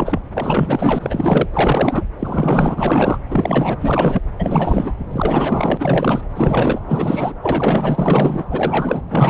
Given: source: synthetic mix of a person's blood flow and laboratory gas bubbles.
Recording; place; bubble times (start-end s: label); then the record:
Doppler ultrasound of blood flow; subclavian vein
0.00-0.21 s: bubbles
0.33-1.47 s: bubbles
1.52-2.04 s: bubbles
2.19-3.19 s: bubbles
3.29-3.77 s: bubbles
3.80-4.21 s: bubbles
4.38-4.92 s: bubbles
5.10-6.21 s: bubbles
6.35-7.33 s: bubbles
7.42-8.45 s: bubbles
8.50-9.03 s: bubbles
9.09-9.30 s: bubbles
From the record:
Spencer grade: 4 (maximum detectable bubble signal sounding continuously throughout systole and diastole of every cardiac period, and overriding the amplitude of the normal cardiac signals); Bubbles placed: anywhere in the cardiac cycle